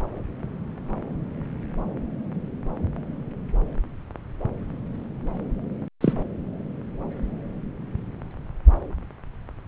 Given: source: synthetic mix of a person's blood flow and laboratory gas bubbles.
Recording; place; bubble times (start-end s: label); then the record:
Doppler ultrasound of blood flow; subclavian vein
6.00-6.13 s: bubbles
From the record:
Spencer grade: 1 (occasional bubble signal discernible with the cardiac motion signal, with majority of cardiac periods free of bubbles); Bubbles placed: anywhere in the cardiac cycle